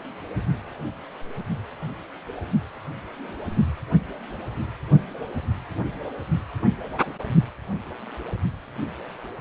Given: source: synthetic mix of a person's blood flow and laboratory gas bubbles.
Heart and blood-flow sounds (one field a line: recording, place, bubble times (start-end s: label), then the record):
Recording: Doppler ultrasound of blood flow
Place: precordium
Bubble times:
no bubbles
From the record:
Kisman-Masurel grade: 000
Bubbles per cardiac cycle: 0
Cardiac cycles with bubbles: 0%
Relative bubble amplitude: no bubbles discernible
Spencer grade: 0 (complete lack of bubble signals)